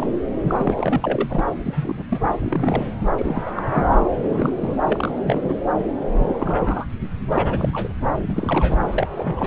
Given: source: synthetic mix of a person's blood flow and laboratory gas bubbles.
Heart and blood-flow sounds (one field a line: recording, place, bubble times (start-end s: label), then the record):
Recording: Doppler ultrasound of blood flow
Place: subclavian vein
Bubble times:
0.00-0.17 s: bubbles
0.48-0.54 s: bubbles
0.57-1.44 s: bubbles
1.56-1.58 s: bubbles
1.62-2.04 s: bubbles
2.10-2.21 s: bubbles
2.39-2.92 s: bubbles
3.17-3.42 s: bubbles
3.46-3.52 s: bubbles
3.56-3.62 s: bubbles
3.71-3.92 s: bubbles
4.22-4.77 s: bubbles
4.90-5.12 s: bubbles
5.15-5.55 s: bubbles
6.25-6.86 s: bubbles
7.30-7.92 s: bubbles
8.28-8.79 s: bubbles
8.87-9.07 s: bubbles
9.14-9.47 s: bubbles
From the record:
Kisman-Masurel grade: 242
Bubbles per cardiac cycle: several, 3 to 8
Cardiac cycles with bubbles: 100%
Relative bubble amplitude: moderate (0.250 to 0.450)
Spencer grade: 3 (all of the cardiac periods contain showers or single bubble signals, but not dominating or overriding the cardiac motion signals)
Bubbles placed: anywhere in the cardiac cycle